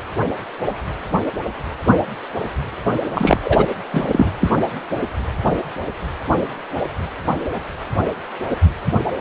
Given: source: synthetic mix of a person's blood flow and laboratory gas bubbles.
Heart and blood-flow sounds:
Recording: Doppler ultrasound of blood flow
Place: precordium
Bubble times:
3.14-3.40 s: bubbles
3.44-3.66 s: bubbles
3.91-4.31 s: bubbles
4.41-4.54 s: bubbles
From the record:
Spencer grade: 1 (occasional bubble signal discernible with the cardiac motion signal, with majority of cardiac periods free of bubbles)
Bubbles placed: anywhere in the cardiac cycle

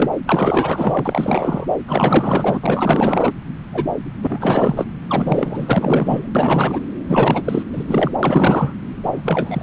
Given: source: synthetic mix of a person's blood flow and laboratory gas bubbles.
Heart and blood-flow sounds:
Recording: Doppler ultrasound of blood flow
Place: subclavian vein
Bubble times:
0.00-0.10 s: bubbles
0.26-1.66 s: bubbles
1.87-2.60 s: bubbles
2.64-3.33 s: bubbles
3.73-3.86 s: bubbles
4.22-4.86 s: bubbles
5.07-6.28 s: bubbles
6.35-6.80 s: bubbles
7.08-7.63 s: bubbles
7.73-7.84 s: bubbles
7.87-8.11 s: bubbles
8.22-8.74 s: bubbles
9.03-9.63 s: bubbles
From the record:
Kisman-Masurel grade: 444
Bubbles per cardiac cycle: continuous sound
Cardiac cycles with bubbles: 100%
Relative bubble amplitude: maximal (0.775 to 0.999)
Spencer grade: 4 (maximum detectable bubble signal sounding continuously throughout systole and diastole of every cardiac period, and overriding the amplitude of the normal cardiac signals)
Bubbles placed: anywhere in the cardiac cycle

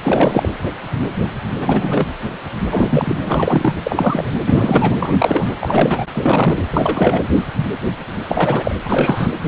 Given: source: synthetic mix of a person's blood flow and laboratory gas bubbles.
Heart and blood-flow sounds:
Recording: Doppler ultrasound of blood flow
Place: precordium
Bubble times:
0.03-0.49 s: bubbles
1.59-2.06 s: bubbles
2.71-3.15 s: bubbles
3.25-3.73 s: bubbles
3.83-4.31 s: bubbles
4.46-4.96 s: bubbles
5.00-5.54 s: bubbles
5.61-6.05 s: bubbles
6.14-6.62 s: bubbles
6.70-7.23 s: bubbles
8.28-8.76 s: bubbles
8.85-9.29 s: bubbles
From the record:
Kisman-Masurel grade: 333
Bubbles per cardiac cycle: rolling drumbeat, 9 or more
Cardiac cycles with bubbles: 50 to 99%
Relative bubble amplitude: loud (0.450 to 0.775)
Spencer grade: 3 (all of the cardiac periods contain showers or single bubble signals, but not dominating or overriding the cardiac motion signals)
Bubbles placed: anywhere in the cardiac cycle

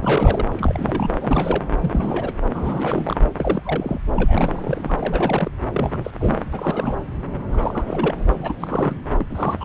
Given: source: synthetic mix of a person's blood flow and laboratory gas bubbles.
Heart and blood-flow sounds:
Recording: Doppler ultrasound of blood flow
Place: subclavian vein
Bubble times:
0.02-0.46 s: bubbles
0.52-1.10 s: bubbles
1.20-1.63 s: bubbles
1.80-2.33 s: bubbles
2.50-3.22 s: bubbles
3.37-3.99 s: bubbles
4.15-4.96 s: bubbles
4.99-5.51 s: bubbles
5.72-6.11 s: bubbles
6.20-6.36 s: bubbles
6.53-6.96 s: bubbles
7.51-8.14 s: bubbles
8.27-8.96 s: bubbles
9.18-9.26 s: bubbles
9.29-9.65 s: bubbles
From the record:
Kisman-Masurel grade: 342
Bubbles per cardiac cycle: rolling drumbeat, 9 or more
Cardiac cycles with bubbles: 100%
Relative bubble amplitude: moderate (0.250 to 0.450)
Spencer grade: 3 (all of the cardiac periods contain showers or single bubble signals, but not dominating or overriding the cardiac motion signals)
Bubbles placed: anywhere in the cardiac cycle

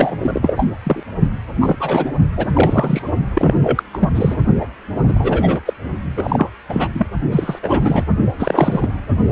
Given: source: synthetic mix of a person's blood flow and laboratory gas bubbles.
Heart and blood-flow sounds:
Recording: Doppler ultrasound of blood flow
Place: precordium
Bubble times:
0.00-0.16 s: bubbles
0.19-0.67 s: bubbles
0.83-1.03 s: bubbles
1.60-1.76 s: bubbles
1.80-2.12 s: bubbles
2.37-3.02 s: bubbles
3.34-3.54 s: bubbles
3.63-3.83 s: bubbles
3.93-4.09 s: bubbles
4.15-4.38 s: bubbles
4.60-4.67 s: bubbles
5.08-5.61 s: bubbles
5.65-5.73 s: bubbles
6.17-6.50 s: bubbles
6.68-6.88 s: bubbles
6.94-7.06 s: bubbles
7.31-7.59 s: bubbles
7.62-8.04 s: bubbles
8.39-8.90 s: bubbles
From the record:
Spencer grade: 3 (all of the cardiac periods contain showers or single bubble signals, but not dominating or overriding the cardiac motion signals)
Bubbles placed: only in the low amplitude regions of the cardiac cycle

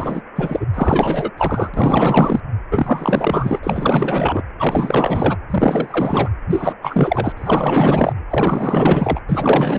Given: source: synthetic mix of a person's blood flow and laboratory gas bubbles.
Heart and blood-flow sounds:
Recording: Doppler ultrasound of blood flow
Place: precordium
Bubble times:
0.00-0.22 s: bubbles
0.35-0.66 s: bubbles
0.74-1.31 s: bubbles
1.38-1.69 s: bubbles
1.73-2.40 s: bubbles
2.71-3.60 s: bubbles
3.63-4.42 s: bubbles
4.58-5.37 s: bubbles
5.50-6.29 s: bubbles
6.50-6.74 s: bubbles
6.82-7.33 s: bubbles
7.37-8.13 s: bubbles
8.29-9.20 s: bubbles
9.28-9.79 s: bubbles
From the record:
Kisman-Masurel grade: 444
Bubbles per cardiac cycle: continuous sound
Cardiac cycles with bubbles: 100%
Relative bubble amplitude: maximal (0.775 to 0.999)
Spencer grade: 4 (maximum detectable bubble signal sounding continuously throughout systole and diastole of every cardiac period, and overriding the amplitude of the normal cardiac signals)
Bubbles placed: anywhere in the cardiac cycle

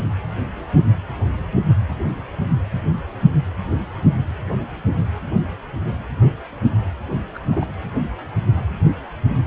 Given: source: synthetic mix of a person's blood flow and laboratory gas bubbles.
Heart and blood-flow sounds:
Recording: Doppler ultrasound of blood flow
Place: precordium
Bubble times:
7.34-7.39 s: bubbles
7.50-7.69 s: bubbles
From the record:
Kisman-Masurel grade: 211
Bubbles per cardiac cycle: several, 3 to 8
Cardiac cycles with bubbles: 1 to 10%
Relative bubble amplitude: barely perceptible (0.100 to 0.250)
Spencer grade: 1 (occasional bubble signal discernible with the cardiac motion signal, with majority of cardiac periods free of bubbles)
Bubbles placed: anywhere in the cardiac cycle

